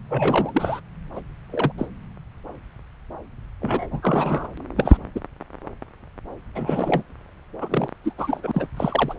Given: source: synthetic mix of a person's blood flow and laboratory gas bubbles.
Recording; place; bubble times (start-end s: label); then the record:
Doppler ultrasound of blood flow; subclavian vein
0.09-0.80 s: bubbles
1.15-1.20 s: bubbles
1.51-1.72 s: bubbles
1.77-1.86 s: bubbles
3.61-3.87 s: bubbles
3.90-4.47 s: bubbles
4.77-4.97 s: bubbles
5.15-5.20 s: bubbles
6.54-7.03 s: bubbles
7.61-7.88 s: bubbles
8.04-8.13 s: bubbles
8.17-8.40 s: bubbles
8.43-8.68 s: bubbles
8.76-9.14 s: bubbles
From the record:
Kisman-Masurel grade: 232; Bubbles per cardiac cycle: several, 3 to 8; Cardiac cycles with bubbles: 50 to 99%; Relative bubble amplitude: moderate (0.250 to 0.450); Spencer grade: 3 (all of the cardiac periods contain showers or single bubble signals, but not dominating or overriding the cardiac motion signals); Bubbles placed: anywhere in the cardiac cycle